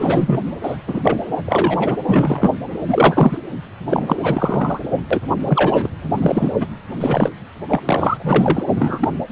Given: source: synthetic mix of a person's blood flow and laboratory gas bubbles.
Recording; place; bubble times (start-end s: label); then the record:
Doppler ultrasound of blood flow; precordium
0.00-0.40 s: bubbles
0.62-0.77 s: bubbles
0.86-1.18 s: bubbles
1.45-1.97 s: bubbles
2.07-2.53 s: bubbles
2.88-3.39 s: bubbles
3.89-4.17 s: bubbles
4.20-4.80 s: bubbles
5.10-5.21 s: bubbles
5.43-5.88 s: bubbles
6.13-6.53 s: bubbles
6.60-6.67 s: bubbles
6.90-7.30 s: bubbles
7.68-7.80 s: bubbles
7.85-8.63 s: bubbles
8.77-9.09 s: bubbles
From the record:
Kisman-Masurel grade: 243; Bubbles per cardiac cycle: several, 3 to 8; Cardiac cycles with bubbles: 100%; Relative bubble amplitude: loud (0.450 to 0.775); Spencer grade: 3 (all of the cardiac periods contain showers or single bubble signals, but not dominating or overriding the cardiac motion signals); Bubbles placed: anywhere in the cardiac cycle